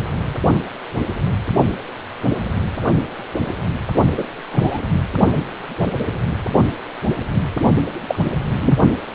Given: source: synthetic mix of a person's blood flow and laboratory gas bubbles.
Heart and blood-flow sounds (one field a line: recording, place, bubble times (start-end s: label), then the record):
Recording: Doppler ultrasound of blood flow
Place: precordium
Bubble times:
4.17-4.24 s: bubbles
4.52-4.80 s: bubbles
5.82-5.88 s: bubbles
8.08-8.20 s: bubbles
8.60-8.77 s: bubbles
From the record:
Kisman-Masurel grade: 123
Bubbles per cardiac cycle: 1 to 2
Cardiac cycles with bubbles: 10 to 50%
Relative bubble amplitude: loud (0.450 to 0.775)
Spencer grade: 2 (many but less than half of the cardiac periods contain bubble signals, singularly or in groups)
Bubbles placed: only in the low amplitude regions of the cardiac cycle